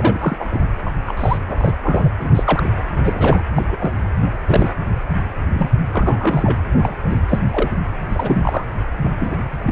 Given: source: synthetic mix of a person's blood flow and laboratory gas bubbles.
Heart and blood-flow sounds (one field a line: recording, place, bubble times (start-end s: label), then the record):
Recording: Doppler ultrasound of blood flow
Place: precordium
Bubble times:
0.00-0.65 s: bubbles
0.85-0.90 s: bubbles
1.06-1.14 s: bubbles
1.17-1.39 s: bubbles
1.47-1.73 s: bubbles
1.82-2.09 s: bubbles
2.19-2.29 s: bubbles
2.35-2.69 s: bubbles
3.04-3.44 s: bubbles
3.56-3.65 s: bubbles
3.69-3.91 s: bubbles
4.47-4.72 s: bubbles
5.53-5.70 s: bubbles
5.92-6.60 s: bubbles
6.84-6.94 s: bubbles
7.05-7.21 s: bubbles
7.28-7.40 s: bubbles
7.50-7.71 s: bubbles
8.08-8.65 s: bubbles
9.01-9.38 s: bubbles
9.49-9.71 s: bubbles
From the record:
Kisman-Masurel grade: 242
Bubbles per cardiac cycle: several, 3 to 8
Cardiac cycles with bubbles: 100%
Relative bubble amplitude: moderate (0.250 to 0.450)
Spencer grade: 3 (all of the cardiac periods contain showers or single bubble signals, but not dominating or overriding the cardiac motion signals)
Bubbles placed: anywhere in the cardiac cycle